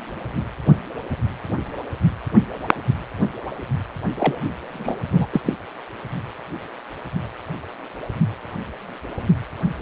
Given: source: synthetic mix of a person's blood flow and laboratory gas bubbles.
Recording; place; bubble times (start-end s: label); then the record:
Doppler ultrasound of blood flow; precordium
4.18-4.35 s: bubbles
4.73-5.04 s: bubbles
5.12-5.25 s: bubbles
5.33-5.41 s: bubbles
5.45-5.54 s: bubbles
From the record:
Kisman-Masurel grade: 222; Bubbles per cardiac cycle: several, 3 to 8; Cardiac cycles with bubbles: 10 to 50%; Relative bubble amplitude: moderate (0.250 to 0.450); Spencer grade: 2 (many but less than half of the cardiac periods contain bubble signals, singularly or in groups); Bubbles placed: anywhere in the cardiac cycle